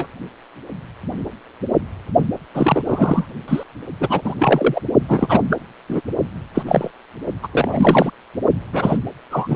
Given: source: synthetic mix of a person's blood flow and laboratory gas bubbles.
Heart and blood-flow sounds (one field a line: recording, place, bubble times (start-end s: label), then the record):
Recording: Doppler ultrasound of blood flow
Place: precordium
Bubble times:
0.00-0.08 s: bubbles
2.54-2.82 s: bubbles
2.85-3.25 s: bubbles
3.48-3.63 s: bubbles
4.00-4.21 s: bubbles
4.24-4.34 s: bubbles
4.38-4.82 s: bubbles
5.08-5.42 s: bubbles
5.50-5.57 s: bubbles
5.88-6.02 s: bubbles
6.54-6.63 s: bubbles
6.66-6.91 s: bubbles
7.42-7.48 s: bubbles
7.51-8.11 s: bubbles
8.72-8.97 s: bubbles
9.30-9.56 s: bubbles
From the record:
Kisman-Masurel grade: 233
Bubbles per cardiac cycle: several, 3 to 8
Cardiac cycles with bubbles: 50 to 99%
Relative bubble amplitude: loud (0.450 to 0.775)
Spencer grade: 3 (all of the cardiac periods contain showers or single bubble signals, but not dominating or overriding the cardiac motion signals)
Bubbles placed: only in the low amplitude regions of the cardiac cycle